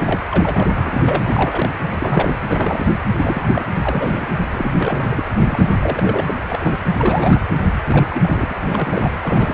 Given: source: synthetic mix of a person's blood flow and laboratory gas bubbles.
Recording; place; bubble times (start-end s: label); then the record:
Doppler ultrasound of blood flow; precordium
0.00-0.24 s: bubbles
0.31-0.73 s: bubbles
0.77-1.21 s: bubbles
1.24-1.70 s: bubbles
1.84-2.38 s: bubbles
2.46-2.90 s: bubbles
3.16-3.65 s: bubbles
3.73-4.27 s: bubbles
4.53-5.24 s: bubbles
5.44-5.72 s: bubbles
5.82-6.36 s: bubbles
6.49-6.78 s: bubbles
6.96-7.40 s: bubbles
7.84-8.58 s: bubbles
8.63-9.12 s: bubbles
9.21-9.54 s: bubbles
From the record:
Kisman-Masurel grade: 342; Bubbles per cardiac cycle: rolling drumbeat, 9 or more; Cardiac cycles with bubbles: 100%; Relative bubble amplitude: moderate (0.250 to 0.450); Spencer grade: 3 (all of the cardiac periods contain showers or single bubble signals, but not dominating or overriding the cardiac motion signals); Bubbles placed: anywhere in the cardiac cycle